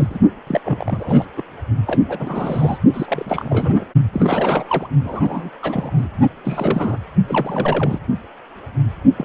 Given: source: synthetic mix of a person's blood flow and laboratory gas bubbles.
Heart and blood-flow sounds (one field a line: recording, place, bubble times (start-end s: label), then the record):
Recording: Doppler ultrasound of blood flow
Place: precordium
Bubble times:
0.00-0.07 s: bubbles
0.09-0.19 s: bubbles
0.47-0.60 s: bubbles
0.65-1.25 s: bubbles
1.36-1.43 s: bubbles
1.86-1.99 s: bubbles
2.08-2.79 s: bubbles
2.93-3.85 s: bubbles
4.12-4.89 s: bubbles
5.04-5.50 s: bubbles
5.62-6.08 s: bubbles
6.44-6.97 s: bubbles
7.27-7.99 s: bubbles
9.16-9.25 s: bubbles
From the record:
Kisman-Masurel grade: 332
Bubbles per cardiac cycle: rolling drumbeat, 9 or more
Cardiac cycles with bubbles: 50 to 99%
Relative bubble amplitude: moderate (0.250 to 0.450)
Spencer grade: 3 (all of the cardiac periods contain showers or single bubble signals, but not dominating or overriding the cardiac motion signals)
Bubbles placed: only in the low amplitude regions of the cardiac cycle